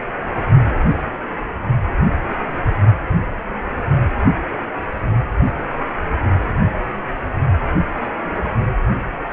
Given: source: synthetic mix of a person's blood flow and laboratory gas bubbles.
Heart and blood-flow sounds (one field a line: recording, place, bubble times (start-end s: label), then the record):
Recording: Doppler ultrasound of blood flow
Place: precordium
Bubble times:
no bubbles
From the record:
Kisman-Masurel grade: 000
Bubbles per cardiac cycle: 0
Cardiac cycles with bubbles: 0%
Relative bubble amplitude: no bubbles discernible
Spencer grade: 0 (complete lack of bubble signals)